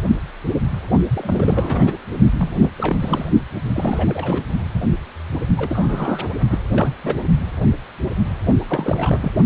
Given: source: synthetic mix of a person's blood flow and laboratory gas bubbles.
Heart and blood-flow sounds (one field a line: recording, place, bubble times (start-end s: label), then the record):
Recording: Doppler ultrasound of blood flow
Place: precordium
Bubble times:
0.00-0.03 s: bubbles
1.14-1.98 s: bubbles
2.38-2.71 s: bubbles
2.77-2.97 s: bubbles
3.00-3.25 s: bubbles
3.72-4.45 s: bubbles
5.57-6.29 s: bubbles
6.50-6.58 s: bubbles
6.71-6.96 s: bubbles
7.04-7.16 s: bubbles
8.68-9.32 s: bubbles
From the record:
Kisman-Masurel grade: 332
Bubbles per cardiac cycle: rolling drumbeat, 9 or more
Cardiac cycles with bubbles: 50 to 99%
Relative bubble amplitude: moderate (0.250 to 0.450)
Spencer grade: 3 (all of the cardiac periods contain showers or single bubble signals, but not dominating or overriding the cardiac motion signals)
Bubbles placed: only in the low amplitude regions of the cardiac cycle